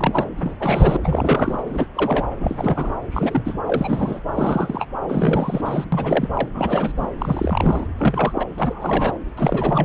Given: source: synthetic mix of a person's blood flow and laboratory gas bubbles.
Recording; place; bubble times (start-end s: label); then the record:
Doppler ultrasound of blood flow; subclavian vein
0.00-0.28 s: bubbles
0.38-0.54 s: bubbles
0.59-0.98 s: bubbles
1.04-1.63 s: bubbles
1.66-1.87 s: bubbles
1.96-2.24 s: bubbles
2.40-2.92 s: bubbles
3.12-3.57 s: bubbles
3.66-4.21 s: bubbles
4.29-4.86 s: bubbles
5.08-5.84 s: bubbles
5.92-6.29 s: bubbles
6.33-6.48 s: bubbles
6.54-6.93 s: bubbles
6.97-7.12 s: bubbles
7.18-7.87 s: bubbles
7.99-8.46 s: bubbles
8.57-9.17 s: bubbles
9.37-9.85 s: bubbles
From the record:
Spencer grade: 3 (all of the cardiac periods contain showers or single bubble signals, but not dominating or overriding the cardiac motion signals); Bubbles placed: anywhere in the cardiac cycle